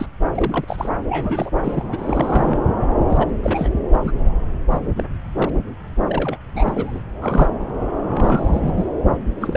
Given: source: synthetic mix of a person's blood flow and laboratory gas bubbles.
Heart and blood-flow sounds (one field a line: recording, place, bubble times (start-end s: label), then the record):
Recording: Doppler ultrasound of blood flow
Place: subclavian vein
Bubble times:
0.00-0.06 s: bubbles
0.35-0.65 s: bubbles
0.67-0.89 s: bubbles
1.09-1.85 s: bubbles
1.92-2.60 s: bubbles
3.09-3.27 s: bubbles
3.42-3.68 s: bubbles
3.92-3.98 s: bubbles
4.04-4.12 s: bubbles
4.71-4.78 s: bubbles
4.96-5.04 s: bubbles
5.33-5.51 s: bubbles
6.08-6.37 s: bubbles
6.54-7.04 s: bubbles
7.21-7.49 s: bubbles
8.09-8.87 s: bubbles
9.41-9.57 s: bubbles
From the record:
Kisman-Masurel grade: 242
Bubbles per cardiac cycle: several, 3 to 8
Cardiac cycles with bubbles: 100%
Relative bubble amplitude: moderate (0.250 to 0.450)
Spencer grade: 3 (all of the cardiac periods contain showers or single bubble signals, but not dominating or overriding the cardiac motion signals)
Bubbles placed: anywhere in the cardiac cycle